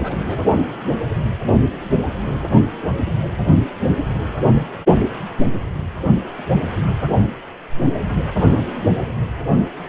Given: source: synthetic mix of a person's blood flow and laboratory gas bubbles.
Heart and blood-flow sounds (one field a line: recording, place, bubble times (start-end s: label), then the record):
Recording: Doppler ultrasound of blood flow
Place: precordium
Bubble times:
0.00-0.43 s: bubbles
From the record:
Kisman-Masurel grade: 121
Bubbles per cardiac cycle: 1 to 2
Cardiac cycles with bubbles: 10 to 50%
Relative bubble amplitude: barely perceptible (0.100 to 0.250)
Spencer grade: 2 (many but less than half of the cardiac periods contain bubble signals, singularly or in groups)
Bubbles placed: only in the low amplitude regions of the cardiac cycle